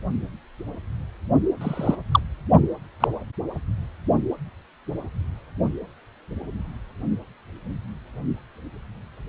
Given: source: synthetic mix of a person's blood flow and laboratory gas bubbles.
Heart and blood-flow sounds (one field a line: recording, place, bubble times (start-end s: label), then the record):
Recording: Doppler ultrasound of blood flow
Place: precordium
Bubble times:
1.61-1.96 s: bubbles
2.12-2.20 s: bubbles
3.00-3.08 s: bubbles
From the record:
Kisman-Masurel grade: 123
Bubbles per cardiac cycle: 1 to 2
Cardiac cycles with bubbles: 10 to 50%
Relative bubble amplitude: loud (0.450 to 0.775)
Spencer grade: 2 (many but less than half of the cardiac periods contain bubble signals, singularly or in groups)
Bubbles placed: only in the low amplitude regions of the cardiac cycle